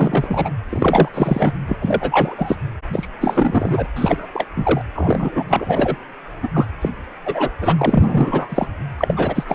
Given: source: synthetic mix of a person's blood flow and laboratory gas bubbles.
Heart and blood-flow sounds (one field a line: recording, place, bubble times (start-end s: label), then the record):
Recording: Doppler ultrasound of blood flow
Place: precordium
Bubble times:
0.00-0.51 s: bubbles
0.69-1.08 s: bubbles
1.13-1.52 s: bubbles
1.67-1.78 s: bubbles
1.81-2.34 s: bubbles
2.38-2.56 s: bubbles
2.92-3.07 s: bubbles
3.21-3.88 s: bubbles
3.96-4.27 s: bubbles
4.33-4.46 s: bubbles
4.56-4.81 s: bubbles
4.95-5.96 s: bubbles
6.42-6.49 s: bubbles
6.54-6.66 s: bubbles
6.81-6.89 s: bubbles
7.25-7.50 s: bubbles
7.60-8.67 s: bubbles
8.99-9.44 s: bubbles
9.48-9.55 s: bubbles
From the record:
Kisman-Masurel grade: 343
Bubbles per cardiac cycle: rolling drumbeat, 9 or more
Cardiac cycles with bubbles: 100%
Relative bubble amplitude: loud (0.450 to 0.775)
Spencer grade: 3 (all of the cardiac periods contain showers or single bubble signals, but not dominating or overriding the cardiac motion signals)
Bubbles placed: anywhere in the cardiac cycle